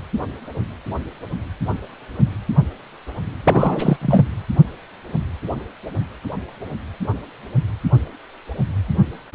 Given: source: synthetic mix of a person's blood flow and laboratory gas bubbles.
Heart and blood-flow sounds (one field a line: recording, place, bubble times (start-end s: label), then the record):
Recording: Doppler ultrasound of blood flow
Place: precordium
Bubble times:
3.44-3.97 s: bubbles
4.01-4.25 s: bubbles
From the record:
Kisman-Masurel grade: 213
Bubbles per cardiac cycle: several, 3 to 8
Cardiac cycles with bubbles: 1 to 10%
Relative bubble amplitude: loud (0.450 to 0.775)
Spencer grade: 1 (occasional bubble signal discernible with the cardiac motion signal, with majority of cardiac periods free of bubbles)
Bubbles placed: anywhere in the cardiac cycle